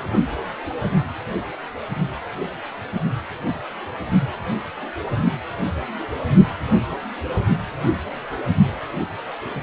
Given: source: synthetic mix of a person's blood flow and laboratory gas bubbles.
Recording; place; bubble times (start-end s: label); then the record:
Doppler ultrasound of blood flow; precordium
7.83-7.89 s: bubbles
From the record:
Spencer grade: 1 (occasional bubble signal discernible with the cardiac motion signal, with majority of cardiac periods free of bubbles); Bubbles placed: anywhere in the cardiac cycle